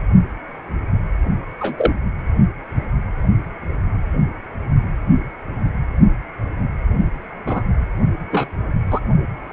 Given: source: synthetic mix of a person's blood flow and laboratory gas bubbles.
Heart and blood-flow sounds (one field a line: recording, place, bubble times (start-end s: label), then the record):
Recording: Doppler ultrasound of blood flow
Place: precordium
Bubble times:
1.60-1.91 s: bubbles
7.46-7.62 s: bubbles
8.30-8.47 s: bubbles
8.90-8.99 s: bubbles
From the record:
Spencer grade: 2 (many but less than half of the cardiac periods contain bubble signals, singularly or in groups)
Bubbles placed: only in the low amplitude regions of the cardiac cycle